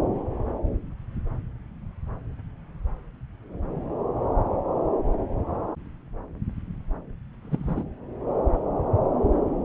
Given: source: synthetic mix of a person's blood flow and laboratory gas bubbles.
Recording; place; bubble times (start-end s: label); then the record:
Doppler ultrasound of blood flow; subclavian vein
7.42-7.84 s: bubbles
From the record:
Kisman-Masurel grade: 121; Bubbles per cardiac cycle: 1 to 2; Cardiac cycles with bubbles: 10 to 50%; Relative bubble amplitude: barely perceptible (0.100 to 0.250); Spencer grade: 2 (many but less than half of the cardiac periods contain bubble signals, singularly or in groups); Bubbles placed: anywhere in the cardiac cycle